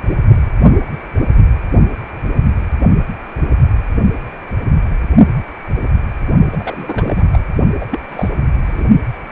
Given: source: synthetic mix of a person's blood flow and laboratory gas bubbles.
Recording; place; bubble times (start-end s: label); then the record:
Doppler ultrasound of blood flow; precordium
6.52-7.25 s: bubbles
7.33-7.38 s: bubbles
7.80-7.87 s: bubbles
7.91-7.99 s: bubbles
8.09-8.29 s: bubbles
8.66-8.84 s: bubbles
From the record:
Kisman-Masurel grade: 222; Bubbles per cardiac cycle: several, 3 to 8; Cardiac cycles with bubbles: 10 to 50%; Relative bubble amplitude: moderate (0.250 to 0.450); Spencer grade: 2 (many but less than half of the cardiac periods contain bubble signals, singularly or in groups); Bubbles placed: only in the low amplitude regions of the cardiac cycle